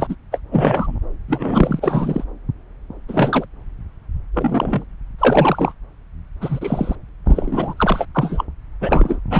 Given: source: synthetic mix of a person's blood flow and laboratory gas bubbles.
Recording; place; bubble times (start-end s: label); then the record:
Doppler ultrasound of blood flow; subclavian vein
0.00-0.16 s: bubbles
0.32-0.40 s: bubbles
0.51-0.97 s: bubbles
1.27-2.24 s: bubbles
3.08-3.46 s: bubbles
4.33-4.85 s: bubbles
5.19-5.74 s: bubbles
6.41-6.96 s: bubbles
7.26-7.74 s: bubbles
7.76-8.06 s: bubbles
8.14-8.45 s: bubbles
8.80-9.20 s: bubbles
9.30-9.39 s: bubbles
From the record:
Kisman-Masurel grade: 233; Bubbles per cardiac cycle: several, 3 to 8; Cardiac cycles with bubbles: 50 to 99%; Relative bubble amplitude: loud (0.450 to 0.775); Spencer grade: 3 (all of the cardiac periods contain showers or single bubble signals, but not dominating or overriding the cardiac motion signals); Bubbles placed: anywhere in the cardiac cycle